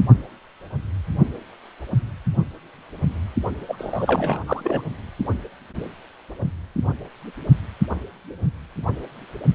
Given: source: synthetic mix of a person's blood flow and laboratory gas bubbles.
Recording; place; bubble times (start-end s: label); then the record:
Doppler ultrasound of blood flow; precordium
3.68-4.40 s: bubbles
4.47-4.83 s: bubbles
From the record:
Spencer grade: 1 (occasional bubble signal discernible with the cardiac motion signal, with majority of cardiac periods free of bubbles); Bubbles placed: only in the low amplitude regions of the cardiac cycle